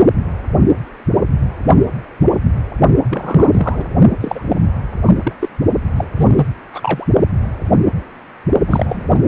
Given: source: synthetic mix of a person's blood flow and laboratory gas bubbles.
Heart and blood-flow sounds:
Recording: Doppler ultrasound of blood flow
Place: precordium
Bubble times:
3.08-3.85 s: bubbles
4.21-4.43 s: bubbles
4.49-4.62 s: bubbles
5.06-5.13 s: bubbles
5.23-5.32 s: bubbles
5.40-5.48 s: bubbles
5.96-6.04 s: bubbles
6.16-6.47 s: bubbles
6.72-7.05 s: bubbles
8.67-9.05 s: bubbles
9.14-9.19 s: bubbles
From the record:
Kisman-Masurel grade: 233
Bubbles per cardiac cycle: several, 3 to 8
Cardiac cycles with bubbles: 50 to 99%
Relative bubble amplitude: loud (0.450 to 0.775)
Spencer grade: 3 (all of the cardiac periods contain showers or single bubble signals, but not dominating or overriding the cardiac motion signals)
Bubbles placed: only in the low amplitude regions of the cardiac cycle

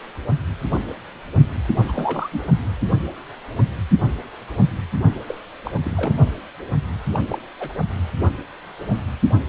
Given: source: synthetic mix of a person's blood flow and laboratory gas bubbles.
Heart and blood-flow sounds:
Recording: Doppler ultrasound of blood flow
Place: precordium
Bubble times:
1.81-2.47 s: bubbles
5.27-5.38 s: bubbles
5.63-5.71 s: bubbles
5.83-6.16 s: bubbles
7.12-7.19 s: bubbles
7.29-7.38 s: bubbles
7.59-7.73 s: bubbles
9.31-9.39 s: bubbles
From the record:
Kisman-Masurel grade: 221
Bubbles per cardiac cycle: several, 3 to 8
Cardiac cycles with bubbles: 10 to 50%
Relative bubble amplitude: barely perceptible (0.100 to 0.250)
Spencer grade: 2 (many but less than half of the cardiac periods contain bubble signals, singularly or in groups)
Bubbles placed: only in the low amplitude regions of the cardiac cycle

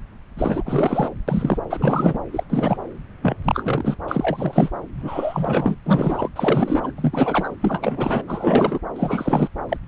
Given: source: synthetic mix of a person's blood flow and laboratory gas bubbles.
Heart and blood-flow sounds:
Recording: Doppler ultrasound of blood flow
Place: subclavian vein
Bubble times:
0.37-1.12 s: bubbles
1.27-1.58 s: bubbles
1.70-2.19 s: bubbles
2.33-2.44 s: bubbles
2.50-2.77 s: bubbles
3.22-3.36 s: bubbles
3.44-3.97 s: bubbles
4.08-4.71 s: bubbles
4.94-5.76 s: bubbles
5.86-6.29 s: bubbles
6.35-6.92 s: bubbles
6.96-7.54 s: bubbles
7.60-8.22 s: bubbles
8.27-8.80 s: bubbles
8.95-9.49 s: bubbles
9.69-9.77 s: bubbles
From the record:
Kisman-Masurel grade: 343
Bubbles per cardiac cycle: rolling drumbeat, 9 or more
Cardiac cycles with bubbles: 100%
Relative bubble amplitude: loud (0.450 to 0.775)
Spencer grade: 3 (all of the cardiac periods contain showers or single bubble signals, but not dominating or overriding the cardiac motion signals)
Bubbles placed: anywhere in the cardiac cycle

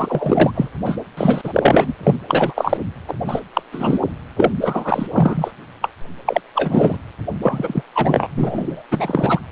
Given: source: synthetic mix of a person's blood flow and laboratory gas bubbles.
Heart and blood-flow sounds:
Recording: Doppler ultrasound of blood flow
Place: precordium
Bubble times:
0.00-0.51 s: bubbles
0.55-0.69 s: bubbles
0.85-0.96 s: bubbles
1.17-1.93 s: bubbles
2.03-2.15 s: bubbles
2.28-2.77 s: bubbles
3.08-3.14 s: bubbles
3.27-3.40 s: bubbles
3.53-3.62 s: bubbles
3.72-3.98 s: bubbles
4.36-4.52 s: bubbles
4.62-5.07 s: bubbles
5.12-5.51 s: bubbles
5.82-5.89 s: bubbles
6.25-6.41 s: bubbles
6.55-6.97 s: bubbles
7.43-7.82 s: bubbles
7.95-8.28 s: bubbles
8.37-8.83 s: bubbles
8.91-9.39 s: bubbles
From the record:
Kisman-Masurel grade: 343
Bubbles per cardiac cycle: rolling drumbeat, 9 or more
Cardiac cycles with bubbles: 100%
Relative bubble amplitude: loud (0.450 to 0.775)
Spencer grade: 3 (all of the cardiac periods contain showers or single bubble signals, but not dominating or overriding the cardiac motion signals)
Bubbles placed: anywhere in the cardiac cycle

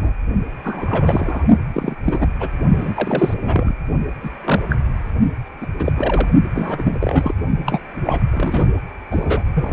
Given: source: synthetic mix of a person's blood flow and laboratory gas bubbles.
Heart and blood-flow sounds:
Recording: Doppler ultrasound of blood flow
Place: precordium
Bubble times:
0.00-0.12 s: bubbles
0.64-1.44 s: bubbles
1.74-1.95 s: bubbles
2.04-2.26 s: bubbles
2.40-2.48 s: bubbles
2.77-3.34 s: bubbles
3.43-3.73 s: bubbles
4.23-4.30 s: bubbles
4.45-4.62 s: bubbles
4.69-4.77 s: bubbles
5.61-5.68 s: bubbles
5.79-5.92 s: bubbles
5.96-6.29 s: bubbles
6.54-6.97 s: bubbles
7.01-7.33 s: bubbles
7.66-7.80 s: bubbles
8.04-8.20 s: bubbles
8.31-8.66 s: bubbles
9.10-9.42 s: bubbles
9.54-9.73 s: bubbles
From the record:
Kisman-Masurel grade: 242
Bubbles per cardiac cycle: several, 3 to 8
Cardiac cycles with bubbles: 100%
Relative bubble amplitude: moderate (0.250 to 0.450)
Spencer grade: 3 (all of the cardiac periods contain showers or single bubble signals, but not dominating or overriding the cardiac motion signals)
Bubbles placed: only in the low amplitude regions of the cardiac cycle

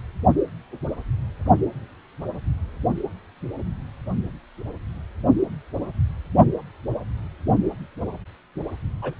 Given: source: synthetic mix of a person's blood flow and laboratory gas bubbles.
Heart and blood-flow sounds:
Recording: Doppler ultrasound of blood flow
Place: precordium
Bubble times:
9.02-9.13 s: bubbles
From the record:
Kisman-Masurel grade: 111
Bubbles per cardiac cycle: 1 to 2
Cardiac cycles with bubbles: 1 to 10%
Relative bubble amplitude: barely perceptible (0.100 to 0.250)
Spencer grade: 1 (occasional bubble signal discernible with the cardiac motion signal, with majority of cardiac periods free of bubbles)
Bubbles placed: only in the low amplitude regions of the cardiac cycle

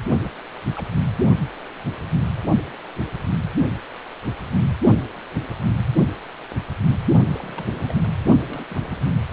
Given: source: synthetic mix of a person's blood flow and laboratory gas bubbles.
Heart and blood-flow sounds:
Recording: Doppler ultrasound of blood flow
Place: precordium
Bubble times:
0.09-0.32 s: bubbles
0.76-0.89 s: bubbles
7.35-7.98 s: bubbles
8.03-8.09 s: bubbles
8.47-8.67 s: bubbles
8.69-9.02 s: bubbles
From the record:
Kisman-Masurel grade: 221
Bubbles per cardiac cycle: several, 3 to 8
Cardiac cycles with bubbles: 10 to 50%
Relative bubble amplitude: barely perceptible (0.100 to 0.250)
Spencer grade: 2 (many but less than half of the cardiac periods contain bubble signals, singularly or in groups)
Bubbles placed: only in the low amplitude regions of the cardiac cycle

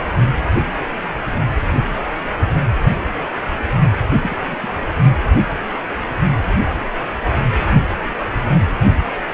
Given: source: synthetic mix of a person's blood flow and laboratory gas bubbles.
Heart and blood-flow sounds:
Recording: Doppler ultrasound of blood flow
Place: precordium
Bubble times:
4.13-4.35 s: bubbles
4.46-4.56 s: bubbles
4.61-4.69 s: bubbles
4.80-4.86 s: bubbles
5.03-5.11 s: bubbles
From the record:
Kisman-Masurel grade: 221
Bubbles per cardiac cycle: several, 3 to 8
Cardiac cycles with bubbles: 10 to 50%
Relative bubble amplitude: barely perceptible (0.100 to 0.250)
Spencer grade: 2 (many but less than half of the cardiac periods contain bubble signals, singularly or in groups)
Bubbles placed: anywhere in the cardiac cycle

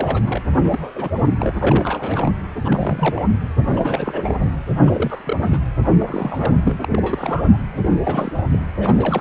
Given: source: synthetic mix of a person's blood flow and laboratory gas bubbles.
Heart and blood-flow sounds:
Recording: Doppler ultrasound of blood flow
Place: precordium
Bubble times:
0.00-0.41 s: bubbles
0.53-0.60 s: bubbles
0.64-0.92 s: bubbles
0.95-1.11 s: bubbles
1.39-1.52 s: bubbles
1.59-2.30 s: bubbles
2.65-3.27 s: bubbles
3.62-4.36 s: bubbles
4.39-4.50 s: bubbles
4.79-5.37 s: bubbles
5.42-5.58 s: bubbles
5.98-6.56 s: bubbles
6.64-6.77 s: bubbles
6.82-6.88 s: bubbles
6.92-7.62 s: bubbles
7.73-7.98 s: bubbles
8.03-8.32 s: bubbles
8.35-8.43 s: bubbles
8.53-8.59 s: bubbles
8.79-9.21 s: bubbles
From the record:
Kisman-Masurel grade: 342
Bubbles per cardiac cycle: rolling drumbeat, 9 or more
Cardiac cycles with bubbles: 100%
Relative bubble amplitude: moderate (0.250 to 0.450)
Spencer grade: 3 (all of the cardiac periods contain showers or single bubble signals, but not dominating or overriding the cardiac motion signals)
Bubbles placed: anywhere in the cardiac cycle

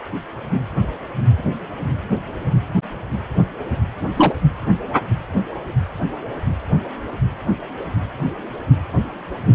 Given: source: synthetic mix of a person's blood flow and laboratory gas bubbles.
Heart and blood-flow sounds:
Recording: Doppler ultrasound of blood flow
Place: precordium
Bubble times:
4.16-4.33 s: bubbles
From the record:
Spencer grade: 1 (occasional bubble signal discernible with the cardiac motion signal, with majority of cardiac periods free of bubbles)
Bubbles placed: anywhere in the cardiac cycle

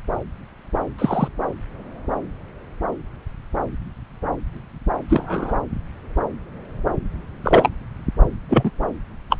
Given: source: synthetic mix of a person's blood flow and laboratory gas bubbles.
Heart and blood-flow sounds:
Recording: Doppler ultrasound of blood flow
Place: subclavian vein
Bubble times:
0.98-1.28 s: bubbles
5.09-5.54 s: bubbles
7.43-7.69 s: bubbles
8.49-8.71 s: bubbles
9.29-9.37 s: bubbles
From the record:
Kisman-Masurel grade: 123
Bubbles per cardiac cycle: 1 to 2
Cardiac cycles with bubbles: 10 to 50%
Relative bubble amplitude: loud (0.450 to 0.775)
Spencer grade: 2 (many but less than half of the cardiac periods contain bubble signals, singularly or in groups)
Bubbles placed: anywhere in the cardiac cycle

